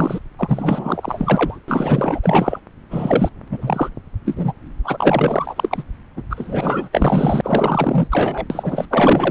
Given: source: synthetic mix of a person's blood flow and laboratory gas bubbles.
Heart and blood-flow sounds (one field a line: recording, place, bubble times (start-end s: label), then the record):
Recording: Doppler ultrasound of blood flow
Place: subclavian vein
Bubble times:
0.00-0.19 s: bubbles
0.38-1.60 s: bubbles
1.68-2.60 s: bubbles
2.90-3.31 s: bubbles
3.51-3.89 s: bubbles
4.25-4.53 s: bubbles
4.83-5.83 s: bubbles
6.16-6.22 s: bubbles
6.29-6.89 s: bubbles
6.92-8.07 s: bubbles
8.11-8.45 s: bubbles
8.50-8.86 s: bubbles
8.90-9.31 s: bubbles
From the record:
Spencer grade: 4 (maximum detectable bubble signal sounding continuously throughout systole and diastole of every cardiac period, and overriding the amplitude of the normal cardiac signals)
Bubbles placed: anywhere in the cardiac cycle